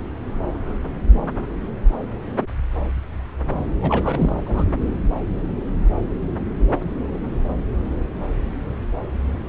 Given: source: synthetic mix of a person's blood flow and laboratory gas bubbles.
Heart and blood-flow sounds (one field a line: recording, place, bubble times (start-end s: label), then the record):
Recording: Doppler ultrasound of blood flow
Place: subclavian vein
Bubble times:
3.80-4.43 s: bubbles
4.46-4.64 s: bubbles
From the record:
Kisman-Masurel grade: 212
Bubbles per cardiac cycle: several, 3 to 8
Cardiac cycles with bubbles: 1 to 10%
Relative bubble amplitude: moderate (0.250 to 0.450)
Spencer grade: 1 (occasional bubble signal discernible with the cardiac motion signal, with majority of cardiac periods free of bubbles)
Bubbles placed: anywhere in the cardiac cycle